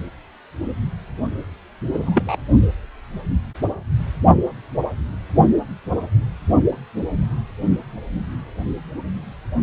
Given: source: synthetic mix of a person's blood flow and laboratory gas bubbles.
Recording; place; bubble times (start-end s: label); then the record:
Doppler ultrasound of blood flow; precordium
1.93-2.36 s: bubbles
From the record:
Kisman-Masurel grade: 113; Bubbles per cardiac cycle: 1 to 2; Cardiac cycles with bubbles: 1 to 10%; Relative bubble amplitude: loud (0.450 to 0.775); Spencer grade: 1 (occasional bubble signal discernible with the cardiac motion signal, with majority of cardiac periods free of bubbles); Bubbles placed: only in the low amplitude regions of the cardiac cycle